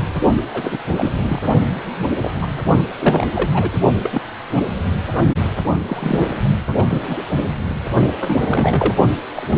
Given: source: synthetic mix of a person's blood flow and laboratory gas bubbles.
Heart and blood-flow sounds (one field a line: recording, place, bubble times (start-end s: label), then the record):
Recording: Doppler ultrasound of blood flow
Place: precordium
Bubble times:
0.54-0.78 s: bubbles
0.97-1.10 s: bubbles
1.22-1.41 s: bubbles
1.95-2.11 s: bubbles
2.20-2.31 s: bubbles
2.41-2.47 s: bubbles
2.98-3.25 s: bubbles
3.35-3.49 s: bubbles
3.54-3.70 s: bubbles
4.03-4.21 s: bubbles
4.56-4.62 s: bubbles
5.88-6.29 s: bubbles
6.75-6.83 s: bubbles
6.88-7.18 s: bubbles
8.20-8.94 s: bubbles
9.35-9.48 s: bubbles
9.51-9.56 s: bubbles
From the record:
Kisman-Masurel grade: 242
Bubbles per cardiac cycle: several, 3 to 8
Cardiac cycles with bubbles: 100%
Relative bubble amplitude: moderate (0.250 to 0.450)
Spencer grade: 3 (all of the cardiac periods contain showers or single bubble signals, but not dominating or overriding the cardiac motion signals)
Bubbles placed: only in the low amplitude regions of the cardiac cycle